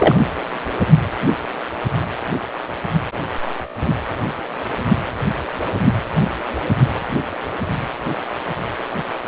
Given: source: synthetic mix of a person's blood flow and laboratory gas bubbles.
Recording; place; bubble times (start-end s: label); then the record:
Doppler ultrasound of blood flow; precordium
0.00-0.17 s: bubbles
From the record:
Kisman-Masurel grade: 213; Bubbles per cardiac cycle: several, 3 to 8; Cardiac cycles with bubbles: 1 to 10%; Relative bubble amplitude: loud (0.450 to 0.775); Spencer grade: 1 (occasional bubble signal discernible with the cardiac motion signal, with majority of cardiac periods free of bubbles); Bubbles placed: anywhere in the cardiac cycle